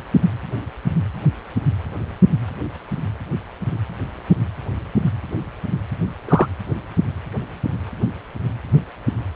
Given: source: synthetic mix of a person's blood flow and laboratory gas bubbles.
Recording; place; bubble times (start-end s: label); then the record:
Doppler ultrasound of blood flow; precordium
6.29-6.47 s: bubbles
From the record:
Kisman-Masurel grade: 113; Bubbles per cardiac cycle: 1 to 2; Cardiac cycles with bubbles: 1 to 10%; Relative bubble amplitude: loud (0.450 to 0.775); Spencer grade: 1 (occasional bubble signal discernible with the cardiac motion signal, with majority of cardiac periods free of bubbles); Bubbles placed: anywhere in the cardiac cycle